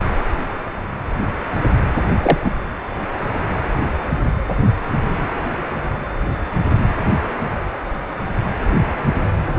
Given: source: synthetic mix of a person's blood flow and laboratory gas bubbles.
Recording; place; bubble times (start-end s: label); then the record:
Doppler ultrasound of blood flow; precordium
2.22-2.38 s: bubbles
2.44-2.51 s: bubbles
From the record:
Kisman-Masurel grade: 113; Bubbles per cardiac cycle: 1 to 2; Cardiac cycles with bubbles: 1 to 10%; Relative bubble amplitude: loud (0.450 to 0.775); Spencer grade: 1 (occasional bubble signal discernible with the cardiac motion signal, with majority of cardiac periods free of bubbles); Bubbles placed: anywhere in the cardiac cycle